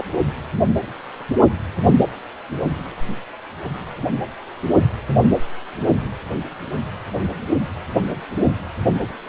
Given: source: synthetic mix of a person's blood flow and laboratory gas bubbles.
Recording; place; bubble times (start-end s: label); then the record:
Doppler ultrasound of blood flow; precordium
0.00-0.04 s: bubbles
From the record:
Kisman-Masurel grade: 211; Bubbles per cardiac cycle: several, 3 to 8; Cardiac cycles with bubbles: 1 to 10%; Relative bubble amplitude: barely perceptible (0.100 to 0.250); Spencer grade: 1 (occasional bubble signal discernible with the cardiac motion signal, with majority of cardiac periods free of bubbles); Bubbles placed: only in the low amplitude regions of the cardiac cycle